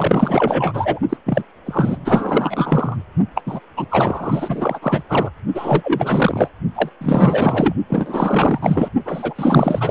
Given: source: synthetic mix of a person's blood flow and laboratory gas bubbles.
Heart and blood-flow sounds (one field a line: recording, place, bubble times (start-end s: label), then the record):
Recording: Doppler ultrasound of blood flow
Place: precordium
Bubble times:
0.00-0.99 s: bubbles
1.09-1.17 s: bubbles
1.26-1.44 s: bubbles
1.66-2.97 s: bubbles
3.35-3.42 s: bubbles
3.46-3.60 s: bubbles
3.77-3.87 s: bubbles
3.91-4.79 s: bubbles
4.82-5.03 s: bubbles
5.08-5.30 s: bubbles
5.54-6.49 s: bubbles
6.75-6.89 s: bubbles
7.01-7.74 s: bubbles
7.89-8.59 s: bubbles
8.62-8.88 s: bubbles
9.05-9.91 s: bubbles
From the record:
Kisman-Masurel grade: 444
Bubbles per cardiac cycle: continuous sound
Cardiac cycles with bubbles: 100%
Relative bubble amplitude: maximal (0.775 to 0.999)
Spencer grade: 4 (maximum detectable bubble signal sounding continuously throughout systole and diastole of every cardiac period, and overriding the amplitude of the normal cardiac signals)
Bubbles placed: only in the low amplitude regions of the cardiac cycle